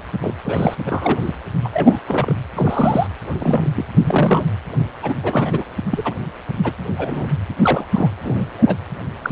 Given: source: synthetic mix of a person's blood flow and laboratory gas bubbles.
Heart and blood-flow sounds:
Doppler ultrasound of blood flow; precordium
0.21-0.34 s: bubbles
0.44-0.75 s: bubbles
0.86-1.33 s: bubbles
1.64-1.69 s: bubbles
1.73-1.99 s: bubbles
2.07-2.34 s: bubbles
2.54-3.07 s: bubbles
3.39-3.85 s: bubbles
3.98-4.46 s: bubbles
5.02-5.14 s: bubbles
5.23-5.64 s: bubbles
5.90-6.13 s: bubbles
6.63-6.72 s: bubbles
6.97-7.29 s: bubbles
7.62-7.86 s: bubbles
7.93-8.10 s: bubbles
8.23-8.76 s: bubbles
9.22-9.32 s: bubbles
From the record:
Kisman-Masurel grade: 242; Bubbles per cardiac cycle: several, 3 to 8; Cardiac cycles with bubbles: 100%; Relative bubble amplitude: moderate (0.250 to 0.450); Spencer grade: 3 (all of the cardiac periods contain showers or single bubble signals, but not dominating or overriding the cardiac motion signals); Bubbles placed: anywhere in the cardiac cycle

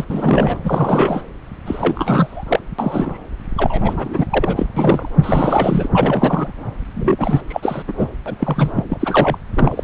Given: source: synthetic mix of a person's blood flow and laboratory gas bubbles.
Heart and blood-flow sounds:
Doppler ultrasound of blood flow; subclavian vein
0.00-0.05 s: bubbles
0.08-0.59 s: bubbles
0.64-1.22 s: bubbles
1.66-2.44 s: bubbles
2.48-2.60 s: bubbles
2.79-3.17 s: bubbles
3.56-4.26 s: bubbles
4.30-4.67 s: bubbles
4.76-5.10 s: bubbles
5.22-5.88 s: bubbles
5.92-6.51 s: bubbles
6.94-7.41 s: bubbles
7.49-7.83 s: bubbles
7.87-7.93 s: bubbles
7.97-8.07 s: bubbles
8.26-8.36 s: bubbles
8.39-8.71 s: bubbles
8.76-8.84 s: bubbles
8.90-9.38 s: bubbles
9.54-9.84 s: bubbles
From the record:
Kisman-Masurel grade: 343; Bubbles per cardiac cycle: rolling drumbeat, 9 or more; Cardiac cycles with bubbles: 100%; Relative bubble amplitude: loud (0.450 to 0.775); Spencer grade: 3 (all of the cardiac periods contain showers or single bubble signals, but not dominating or overriding the cardiac motion signals); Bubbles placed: anywhere in the cardiac cycle

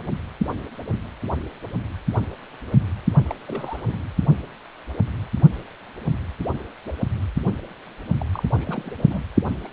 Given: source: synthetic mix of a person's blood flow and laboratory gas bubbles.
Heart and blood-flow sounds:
Doppler ultrasound of blood flow; precordium
3.24-3.35 s: bubbles
3.47-3.98 s: bubbles
8.18-8.26 s: bubbles
8.33-8.43 s: bubbles
8.54-8.92 s: bubbles
8.98-9.23 s: bubbles
9.64-9.69 s: bubbles
From the record:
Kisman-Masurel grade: 221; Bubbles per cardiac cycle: several, 3 to 8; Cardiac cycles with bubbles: 10 to 50%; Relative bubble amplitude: barely perceptible (0.100 to 0.250); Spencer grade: 2 (many but less than half of the cardiac periods contain bubble signals, singularly or in groups); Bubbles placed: only in the low amplitude regions of the cardiac cycle

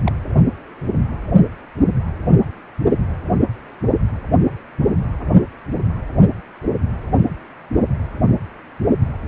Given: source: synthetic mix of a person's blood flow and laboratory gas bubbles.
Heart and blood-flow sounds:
Doppler ultrasound of blood flow; precordium
0.06-0.12 s: bubbles
From the record:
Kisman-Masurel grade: 211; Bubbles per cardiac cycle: several, 3 to 8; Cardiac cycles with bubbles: 1 to 10%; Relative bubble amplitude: barely perceptible (0.100 to 0.250); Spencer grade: 1 (occasional bubble signal discernible with the cardiac motion signal, with majority of cardiac periods free of bubbles); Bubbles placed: anywhere in the cardiac cycle

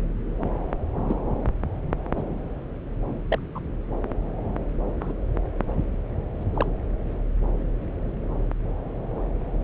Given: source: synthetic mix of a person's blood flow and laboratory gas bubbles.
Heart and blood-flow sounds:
Doppler ultrasound of blood flow; subclavian vein
1.08-1.16 s: bubbles
2.16-2.22 s: bubbles
3.28-3.39 s: bubbles
3.55-3.59 s: bubbles
5.00-5.13 s: bubbles
6.41-6.43 s: bubbles
6.54-6.66 s: bubbles
From the record:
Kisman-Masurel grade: 121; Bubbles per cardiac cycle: 1 to 2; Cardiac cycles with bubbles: 10 to 50%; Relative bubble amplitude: barely perceptible (0.100 to 0.250); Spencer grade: 2 (many but less than half of the cardiac periods contain bubble signals, singularly or in groups); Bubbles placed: anywhere in the cardiac cycle

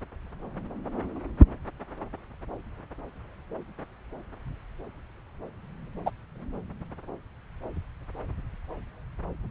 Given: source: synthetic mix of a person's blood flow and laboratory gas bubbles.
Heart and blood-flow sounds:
Doppler ultrasound of blood flow; subclavian vein
6.05-6.10 s: bubbles
From the record:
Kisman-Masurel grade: 113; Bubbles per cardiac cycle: 1 to 2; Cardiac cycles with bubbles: 1 to 10%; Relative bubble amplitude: loud (0.450 to 0.775); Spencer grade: 1 (occasional bubble signal discernible with the cardiac motion signal, with majority of cardiac periods free of bubbles); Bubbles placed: anywhere in the cardiac cycle

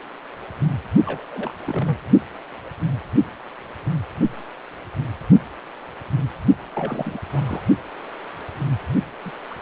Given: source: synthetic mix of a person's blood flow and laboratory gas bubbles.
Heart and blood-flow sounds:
Doppler ultrasound of blood flow; precordium
1.05-1.53 s: bubbles
1.61-1.96 s: bubbles
6.70-7.18 s: bubbles
7.28-7.42 s: bubbles
7.46-7.62 s: bubbles
9.25-9.31 s: bubbles
9.50-9.54 s: bubbles
From the record:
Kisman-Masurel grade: 221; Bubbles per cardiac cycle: several, 3 to 8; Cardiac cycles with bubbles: 10 to 50%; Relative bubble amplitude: barely perceptible (0.100 to 0.250); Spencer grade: 2 (many but less than half of the cardiac periods contain bubble signals, singularly or in groups); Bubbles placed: only in the low amplitude regions of the cardiac cycle

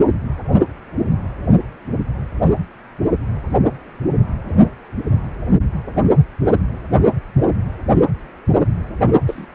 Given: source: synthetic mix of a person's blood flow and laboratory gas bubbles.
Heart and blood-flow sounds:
Doppler ultrasound of blood flow; precordium
9.27-9.47 s: bubbles
From the record:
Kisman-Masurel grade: 111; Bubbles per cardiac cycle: 1 to 2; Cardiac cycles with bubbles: 1 to 10%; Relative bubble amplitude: barely perceptible (0.100 to 0.250); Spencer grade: 1 (occasional bubble signal discernible with the cardiac motion signal, with majority of cardiac periods free of bubbles); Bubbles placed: only in the low amplitude regions of the cardiac cycle

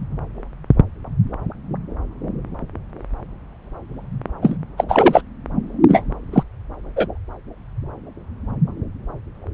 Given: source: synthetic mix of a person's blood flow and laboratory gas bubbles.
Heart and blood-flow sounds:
Doppler ultrasound of blood flow; subclavian vein
4.42-4.57 s: bubbles
4.77-4.85 s: bubbles
4.89-5.23 s: bubbles
5.88-6.03 s: bubbles
6.33-6.43 s: bubbles
6.96-7.08 s: bubbles
From the record:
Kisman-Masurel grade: 223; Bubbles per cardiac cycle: several, 3 to 8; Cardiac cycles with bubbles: 10 to 50%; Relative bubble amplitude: loud (0.450 to 0.775); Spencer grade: 2 (many but less than half of the cardiac periods contain bubble signals, singularly or in groups); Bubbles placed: anywhere in the cardiac cycle

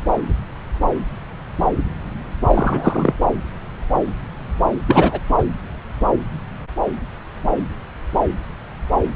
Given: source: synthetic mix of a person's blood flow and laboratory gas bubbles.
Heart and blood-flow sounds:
Doppler ultrasound of blood flow; subclavian vein
2.47-3.13 s: bubbles
4.87-5.20 s: bubbles
5.38-5.43 s: bubbles
From the record:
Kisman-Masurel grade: 223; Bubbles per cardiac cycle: several, 3 to 8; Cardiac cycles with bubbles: 10 to 50%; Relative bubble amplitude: loud (0.450 to 0.775); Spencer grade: 2 (many but less than half of the cardiac periods contain bubble signals, singularly or in groups); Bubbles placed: anywhere in the cardiac cycle

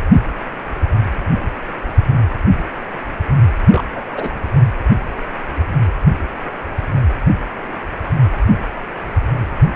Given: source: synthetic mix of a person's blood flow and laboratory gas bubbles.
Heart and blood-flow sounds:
Doppler ultrasound of blood flow; precordium
3.71-3.83 s: bubbles
3.95-4.00 s: bubbles
4.12-4.35 s: bubbles
From the record:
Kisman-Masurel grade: 212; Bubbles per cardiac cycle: several, 3 to 8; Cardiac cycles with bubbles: 1 to 10%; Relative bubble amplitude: moderate (0.250 to 0.450); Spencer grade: 1 (occasional bubble signal discernible with the cardiac motion signal, with majority of cardiac periods free of bubbles); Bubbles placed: anywhere in the cardiac cycle

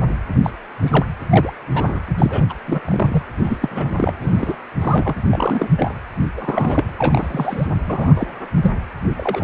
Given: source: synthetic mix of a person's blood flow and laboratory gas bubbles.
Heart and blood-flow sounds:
Doppler ultrasound of blood flow; precordium
0.43-0.50 s: bubbles
0.80-1.05 s: bubbles
1.29-1.53 s: bubbles
1.74-2.03 s: bubbles
2.18-2.46 s: bubbles
2.49-2.54 s: bubbles
2.66-2.81 s: bubbles
2.85-3.23 s: bubbles
3.37-3.58 s: bubbles
3.61-4.13 s: bubbles
4.22-4.55 s: bubbles
4.81-5.15 s: bubbles
5.27-5.71 s: bubbles
5.77-5.94 s: bubbles
6.36-6.84 s: bubbles
6.98-7.67 s: bubbles
7.87-8.13 s: bubbles
8.16-8.27 s: bubbles
8.56-8.71 s: bubbles
9.17-9.44 s: bubbles
From the record:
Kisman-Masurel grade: 242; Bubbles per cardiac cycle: several, 3 to 8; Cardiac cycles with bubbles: 100%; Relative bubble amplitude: moderate (0.250 to 0.450); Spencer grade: 3 (all of the cardiac periods contain showers or single bubble signals, but not dominating or overriding the cardiac motion signals); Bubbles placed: anywhere in the cardiac cycle

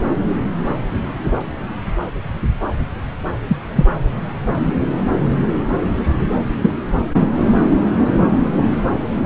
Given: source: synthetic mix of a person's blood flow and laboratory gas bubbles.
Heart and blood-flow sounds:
Doppler ultrasound of blood flow; subclavian vein
3.48-3.56 s: bubbles
3.75-3.85 s: bubbles
6.60-6.72 s: bubbles
From the record:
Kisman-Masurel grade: 123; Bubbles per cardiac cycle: 1 to 2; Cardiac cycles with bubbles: 10 to 50%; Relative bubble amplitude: loud (0.450 to 0.775); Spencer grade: 2 (many but less than half of the cardiac periods contain bubble signals, singularly or in groups); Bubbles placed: anywhere in the cardiac cycle

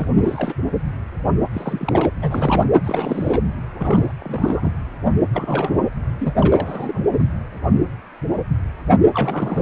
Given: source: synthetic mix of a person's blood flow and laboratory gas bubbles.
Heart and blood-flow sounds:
Doppler ultrasound of blood flow; precordium
0.00-0.07 s: bubbles
0.20-0.54 s: bubbles
1.53-2.12 s: bubbles
2.21-2.66 s: bubbles
2.84-3.43 s: bubbles
3.79-4.12 s: bubbles
4.20-4.71 s: bubbles
5.33-5.76 s: bubbles
6.20-6.34 s: bubbles
6.38-7.00 s: bubbles
7.07-7.23 s: bubbles
9.14-9.61 s: bubbles
From the record:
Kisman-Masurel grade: 332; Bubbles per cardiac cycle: rolling drumbeat, 9 or more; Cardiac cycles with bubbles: 50 to 99%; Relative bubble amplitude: moderate (0.250 to 0.450); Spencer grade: 3 (all of the cardiac periods contain showers or single bubble signals, but not dominating or overriding the cardiac motion signals); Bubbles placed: anywhere in the cardiac cycle

